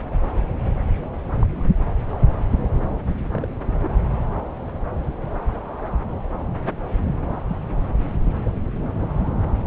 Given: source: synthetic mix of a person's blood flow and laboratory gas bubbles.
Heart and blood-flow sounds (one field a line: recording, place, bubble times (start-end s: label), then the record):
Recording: Doppler ultrasound of blood flow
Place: subclavian vein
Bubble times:
1.40-1.47 s: bubbles
1.55-1.72 s: bubbles
3.32-3.47 s: bubbles
3.82-3.88 s: bubbles
7.47-7.57 s: bubbles
8.44-8.51 s: bubbles
From the record:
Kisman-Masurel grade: 121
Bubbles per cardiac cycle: 1 to 2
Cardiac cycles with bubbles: 10 to 50%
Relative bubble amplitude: barely perceptible (0.100 to 0.250)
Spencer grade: 2 (many but less than half of the cardiac periods contain bubble signals, singularly or in groups)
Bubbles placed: anywhere in the cardiac cycle